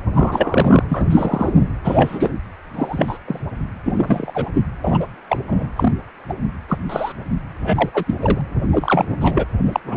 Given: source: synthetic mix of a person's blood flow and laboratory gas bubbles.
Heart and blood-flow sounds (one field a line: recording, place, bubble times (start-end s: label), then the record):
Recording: Doppler ultrasound of blood flow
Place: precordium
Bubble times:
0.15-0.83 s: bubbles
0.89-1.04 s: bubbles
1.10-1.50 s: bubbles
1.84-2.33 s: bubbles
2.74-3.17 s: bubbles
3.27-3.40 s: bubbles
3.85-4.50 s: bubbles
4.54-4.62 s: bubbles
4.84-5.07 s: bubbles
5.29-5.37 s: bubbles
5.48-5.67 s: bubbles
5.76-5.93 s: bubbles
6.29-6.34 s: bubbles
6.69-6.79 s: bubbles
6.89-7.12 s: bubbles
7.60-7.90 s: bubbles
7.94-8.04 s: bubbles
8.07-8.15 s: bubbles
8.22-8.42 s: bubbles
8.71-9.09 s: bubbles
9.21-9.44 s: bubbles
9.63-9.80 s: bubbles
9.85-9.96 s: bubbles
From the record:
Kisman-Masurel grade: 243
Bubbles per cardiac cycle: several, 3 to 8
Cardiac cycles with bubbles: 100%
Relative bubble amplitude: loud (0.450 to 0.775)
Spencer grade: 3 (all of the cardiac periods contain showers or single bubble signals, but not dominating or overriding the cardiac motion signals)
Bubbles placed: anywhere in the cardiac cycle